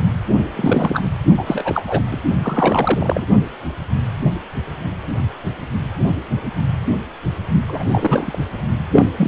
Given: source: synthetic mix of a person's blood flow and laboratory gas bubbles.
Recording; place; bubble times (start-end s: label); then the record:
Doppler ultrasound of blood flow; precordium
0.53-1.09 s: bubbles
1.37-2.02 s: bubbles
2.12-2.21 s: bubbles
2.42-3.25 s: bubbles
7.68-8.38 s: bubbles
8.91-9.06 s: bubbles
9.17-9.28 s: bubbles
From the record:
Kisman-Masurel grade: 332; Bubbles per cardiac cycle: rolling drumbeat, 9 or more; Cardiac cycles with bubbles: 50 to 99%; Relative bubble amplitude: moderate (0.250 to 0.450); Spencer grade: 3 (all of the cardiac periods contain showers or single bubble signals, but not dominating or overriding the cardiac motion signals); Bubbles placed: only in the low amplitude regions of the cardiac cycle